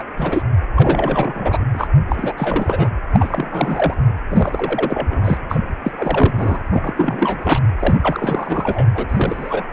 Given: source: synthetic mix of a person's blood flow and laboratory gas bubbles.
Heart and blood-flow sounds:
Doppler ultrasound of blood flow; precordium
0.00-0.03 s: bubbles
0.17-0.43 s: bubbles
0.75-1.65 s: bubbles
1.74-1.88 s: bubbles
2.10-2.34 s: bubbles
2.37-2.90 s: bubbles
3.12-3.94 s: bubbles
4.29-5.38 s: bubbles
5.50-5.59 s: bubbles
5.83-5.92 s: bubbles
5.96-6.59 s: bubbles
6.70-6.93 s: bubbles
6.96-7.60 s: bubbles
7.79-7.96 s: bubbles
8.02-8.88 s: bubbles
8.94-9.63 s: bubbles
From the record:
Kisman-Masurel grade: 342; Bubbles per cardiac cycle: rolling drumbeat, 9 or more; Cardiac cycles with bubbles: 100%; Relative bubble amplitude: moderate (0.250 to 0.450); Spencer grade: 3 (all of the cardiac periods contain showers or single bubble signals, but not dominating or overriding the cardiac motion signals); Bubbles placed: anywhere in the cardiac cycle

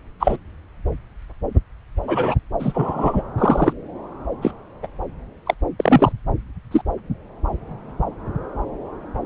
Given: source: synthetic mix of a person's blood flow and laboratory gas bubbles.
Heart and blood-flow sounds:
Doppler ultrasound of blood flow; subclavian vein
0.20-0.36 s: bubbles
2.07-2.35 s: bubbles
2.60-3.23 s: bubbles
3.38-3.73 s: bubbles
4.42-4.51 s: bubbles
4.82-4.87 s: bubbles
5.46-5.54 s: bubbles
5.79-6.12 s: bubbles
6.71-6.81 s: bubbles
From the record:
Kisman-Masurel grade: 123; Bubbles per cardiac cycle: 1 to 2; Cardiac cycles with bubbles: 10 to 50%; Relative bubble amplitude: loud (0.450 to 0.775); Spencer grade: 2 (many but less than half of the cardiac periods contain bubble signals, singularly or in groups); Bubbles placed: anywhere in the cardiac cycle

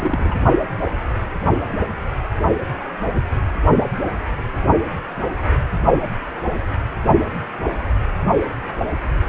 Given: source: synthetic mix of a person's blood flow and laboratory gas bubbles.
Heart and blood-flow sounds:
Doppler ultrasound of blood flow; precordium
0.00-0.35 s: bubbles
From the record:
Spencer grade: 1 (occasional bubble signal discernible with the cardiac motion signal, with majority of cardiac periods free of bubbles); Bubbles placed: only in the low amplitude regions of the cardiac cycle

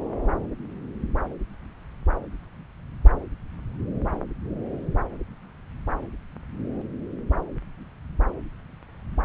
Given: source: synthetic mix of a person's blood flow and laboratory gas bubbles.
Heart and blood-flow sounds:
Doppler ultrasound of blood flow; subclavian vein
no bubbles
From the record:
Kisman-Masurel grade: 000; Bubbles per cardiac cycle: 0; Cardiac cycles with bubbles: 0%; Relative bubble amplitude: no bubbles discernible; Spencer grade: 0 (complete lack of bubble signals)

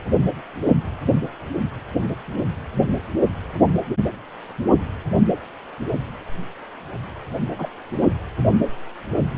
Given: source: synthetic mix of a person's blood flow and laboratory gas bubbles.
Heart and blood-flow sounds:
Doppler ultrasound of blood flow; precordium
7.58-7.69 s: bubbles
7.91-8.08 s: bubbles
From the record:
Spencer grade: 2 (many but less than half of the cardiac periods contain bubble signals, singularly or in groups); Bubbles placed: only in the low amplitude regions of the cardiac cycle

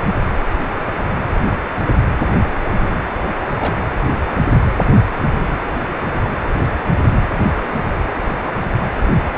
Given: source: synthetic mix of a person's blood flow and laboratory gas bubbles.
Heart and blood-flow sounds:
Doppler ultrasound of blood flow; precordium
2.78-3.05 s: bubbles
3.59-3.77 s: bubbles
From the record:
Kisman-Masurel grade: 111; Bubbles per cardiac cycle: 1 to 2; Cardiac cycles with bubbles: 1 to 10%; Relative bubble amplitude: barely perceptible (0.100 to 0.250); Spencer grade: 1 (occasional bubble signal discernible with the cardiac motion signal, with majority of cardiac periods free of bubbles); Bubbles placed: anywhere in the cardiac cycle

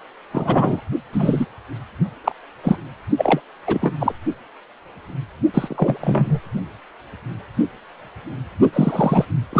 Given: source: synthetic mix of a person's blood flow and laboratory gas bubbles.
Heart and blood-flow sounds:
Doppler ultrasound of blood flow; precordium
0.32-0.81 s: bubbles
1.12-1.46 s: bubbles
2.24-2.32 s: bubbles
2.63-2.77 s: bubbles
3.17-3.41 s: bubbles
3.67-3.95 s: bubbles
4.00-4.13 s: bubbles
5.54-6.39 s: bubbles
8.73-9.25 s: bubbles
9.53-9.60 s: bubbles
From the record:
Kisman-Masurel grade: 233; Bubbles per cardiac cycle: several, 3 to 8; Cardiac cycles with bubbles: 50 to 99%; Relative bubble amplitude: loud (0.450 to 0.775); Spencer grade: 3 (all of the cardiac periods contain showers or single bubble signals, but not dominating or overriding the cardiac motion signals); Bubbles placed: only in the low amplitude regions of the cardiac cycle

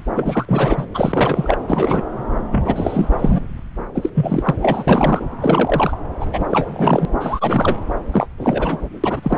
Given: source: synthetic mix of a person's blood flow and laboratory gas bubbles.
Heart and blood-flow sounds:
Doppler ultrasound of blood flow; subclavian vein
0.14-0.45 s: bubbles
0.47-0.85 s: bubbles
0.94-1.57 s: bubbles
1.68-2.02 s: bubbles
2.51-3.10 s: bubbles
3.19-3.41 s: bubbles
3.94-4.10 s: bubbles
4.14-4.54 s: bubbles
4.62-4.84 s: bubbles
4.87-5.25 s: bubbles
5.41-5.98 s: bubbles
6.20-6.26 s: bubbles
6.32-6.39 s: bubbles
6.50-7.05 s: bubbles
7.20-7.77 s: bubbles
8.12-8.27 s: bubbles
8.37-8.88 s: bubbles
9.04-9.38 s: bubbles
From the record:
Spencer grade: 3 (all of the cardiac periods contain showers or single bubble signals, but not dominating or overriding the cardiac motion signals); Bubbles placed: anywhere in the cardiac cycle

